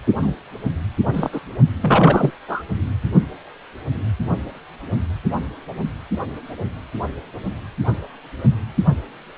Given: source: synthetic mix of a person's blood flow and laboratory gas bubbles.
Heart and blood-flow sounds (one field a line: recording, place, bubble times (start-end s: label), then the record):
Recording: Doppler ultrasound of blood flow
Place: precordium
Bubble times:
0.18-0.33 s: bubbles
1.14-1.29 s: bubbles
1.32-1.40 s: bubbles
1.82-2.30 s: bubbles
2.48-2.62 s: bubbles
From the record:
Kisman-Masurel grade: 222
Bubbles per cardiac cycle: several, 3 to 8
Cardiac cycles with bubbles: 10 to 50%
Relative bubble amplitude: moderate (0.250 to 0.450)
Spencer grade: 2 (many but less than half of the cardiac periods contain bubble signals, singularly or in groups)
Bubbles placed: only in the low amplitude regions of the cardiac cycle